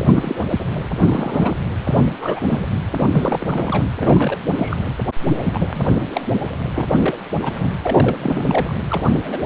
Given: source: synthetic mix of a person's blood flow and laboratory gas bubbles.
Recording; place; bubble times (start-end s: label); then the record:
Doppler ultrasound of blood flow; precordium
0.00-0.07 s: bubbles
0.15-0.36 s: bubbles
0.49-0.67 s: bubbles
1.03-1.56 s: bubbles
1.84-2.06 s: bubbles
2.21-2.40 s: bubbles
2.46-2.65 s: bubbles
2.96-3.07 s: bubbles
3.10-3.84 s: bubbles
3.99-4.38 s: bubbles
4.56-4.77 s: bubbles
5.45-5.84 s: bubbles
6.12-6.21 s: bubbles
6.75-6.88 s: bubbles
7.00-7.19 s: bubbles
7.42-7.73 s: bubbles
7.81-8.16 s: bubbles
8.21-8.75 s: bubbles
8.88-9.02 s: bubbles
9.24-9.46 s: bubbles
From the record:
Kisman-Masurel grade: 242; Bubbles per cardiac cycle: several, 3 to 8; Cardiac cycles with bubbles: 100%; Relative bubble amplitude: moderate (0.250 to 0.450); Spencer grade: 3 (all of the cardiac periods contain showers or single bubble signals, but not dominating or overriding the cardiac motion signals); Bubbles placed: anywhere in the cardiac cycle